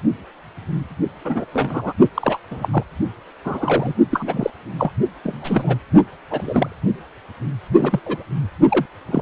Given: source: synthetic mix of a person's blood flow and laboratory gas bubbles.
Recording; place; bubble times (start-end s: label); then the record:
Doppler ultrasound of blood flow; precordium
1.24-1.45 s: bubbles
1.53-1.93 s: bubbles
2.15-2.39 s: bubbles
2.51-2.68 s: bubbles
2.71-2.83 s: bubbles
3.45-3.95 s: bubbles
4.11-4.50 s: bubbles
4.79-4.91 s: bubbles
5.24-5.77 s: bubbles
6.29-6.76 s: bubbles
7.77-8.00 s: bubbles
8.05-8.25 s: bubbles
8.69-8.86 s: bubbles
9.06-9.22 s: bubbles
From the record:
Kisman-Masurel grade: 232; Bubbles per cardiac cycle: several, 3 to 8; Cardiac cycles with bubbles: 50 to 99%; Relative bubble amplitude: moderate (0.250 to 0.450); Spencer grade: 3 (all of the cardiac periods contain showers or single bubble signals, but not dominating or overriding the cardiac motion signals); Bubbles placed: only in the low amplitude regions of the cardiac cycle